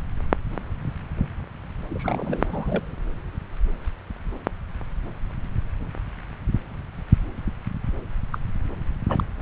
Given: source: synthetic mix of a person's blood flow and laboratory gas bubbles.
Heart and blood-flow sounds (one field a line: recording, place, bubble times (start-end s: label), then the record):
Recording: Doppler ultrasound of blood flow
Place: subclavian vein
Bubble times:
1.89-2.83 s: bubbles
8.32-8.38 s: bubbles
9.09-9.23 s: bubbles
From the record:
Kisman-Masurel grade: 221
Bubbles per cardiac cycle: several, 3 to 8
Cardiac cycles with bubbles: 10 to 50%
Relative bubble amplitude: barely perceptible (0.100 to 0.250)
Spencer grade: 2 (many but less than half of the cardiac periods contain bubble signals, singularly or in groups)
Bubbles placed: anywhere in the cardiac cycle